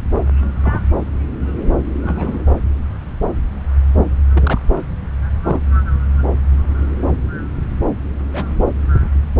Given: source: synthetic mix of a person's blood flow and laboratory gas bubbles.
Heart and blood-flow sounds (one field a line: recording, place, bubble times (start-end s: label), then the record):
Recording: Doppler ultrasound of blood flow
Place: subclavian vein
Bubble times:
0.62-0.80 s: bubbles
2.03-2.43 s: bubbles
4.33-4.59 s: bubbles
5.46-5.59 s: bubbles
8.32-8.62 s: bubbles
From the record:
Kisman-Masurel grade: 122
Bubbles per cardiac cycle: 1 to 2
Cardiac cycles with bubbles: 10 to 50%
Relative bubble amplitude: moderate (0.250 to 0.450)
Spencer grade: 2 (many but less than half of the cardiac periods contain bubble signals, singularly or in groups)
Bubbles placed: anywhere in the cardiac cycle